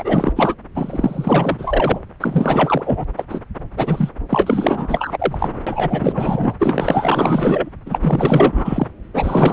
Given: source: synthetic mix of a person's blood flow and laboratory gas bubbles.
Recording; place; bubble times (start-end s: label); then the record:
Doppler ultrasound of blood flow; subclavian vein
0.00-0.33 s: bubbles
0.36-0.54 s: bubbles
0.75-2.00 s: bubbles
2.20-3.05 s: bubbles
3.16-3.25 s: bubbles
3.29-3.41 s: bubbles
3.77-4.09 s: bubbles
4.29-5.61 s: bubbles
5.67-6.55 s: bubbles
6.59-7.70 s: bubbles
7.86-8.87 s: bubbles
9.13-9.53 s: bubbles
From the record:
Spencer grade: 4 (maximum detectable bubble signal sounding continuously throughout systole and diastole of every cardiac period, and overriding the amplitude of the normal cardiac signals); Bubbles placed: anywhere in the cardiac cycle